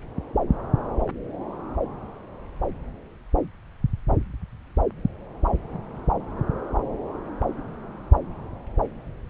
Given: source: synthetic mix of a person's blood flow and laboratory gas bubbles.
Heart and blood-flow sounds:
Doppler ultrasound of blood flow; subclavian vein
no bubbles
From the record:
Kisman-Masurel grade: 000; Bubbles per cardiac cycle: 0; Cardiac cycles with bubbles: 0%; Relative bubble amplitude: no bubbles discernible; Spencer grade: 0 (complete lack of bubble signals)

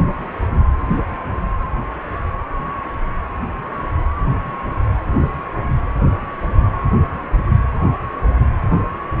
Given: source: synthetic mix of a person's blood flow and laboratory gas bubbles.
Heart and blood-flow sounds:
Doppler ultrasound of blood flow; precordium
no bubbles
From the record:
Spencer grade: 0 (complete lack of bubble signals)

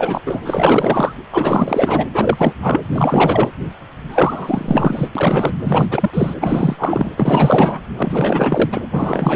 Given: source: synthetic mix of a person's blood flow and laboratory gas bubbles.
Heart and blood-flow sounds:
Doppler ultrasound of blood flow; precordium
0.00-0.22 s: bubbles
0.25-0.41 s: bubbles
0.45-1.12 s: bubbles
1.32-2.06 s: bubbles
2.14-2.54 s: bubbles
2.60-2.81 s: bubbles
2.96-3.50 s: bubbles
4.08-5.08 s: bubbles
5.15-5.54 s: bubbles
5.63-5.87 s: bubbles
5.90-6.10 s: bubbles
6.13-6.34 s: bubbles
6.40-7.10 s: bubbles
7.17-7.80 s: bubbles
7.97-8.82 s: bubbles
8.91-9.36 s: bubbles
From the record:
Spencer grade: 4 (maximum detectable bubble signal sounding continuously throughout systole and diastole of every cardiac period, and overriding the amplitude of the normal cardiac signals); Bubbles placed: anywhere in the cardiac cycle

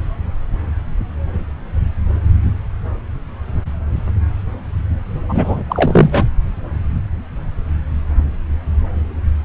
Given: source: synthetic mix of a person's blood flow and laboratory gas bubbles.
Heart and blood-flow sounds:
Doppler ultrasound of blood flow; subclavian vein
5.29-5.62 s: bubbles
5.69-6.25 s: bubbles
From the record:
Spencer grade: 1 (occasional bubble signal discernible with the cardiac motion signal, with majority of cardiac periods free of bubbles); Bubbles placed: anywhere in the cardiac cycle

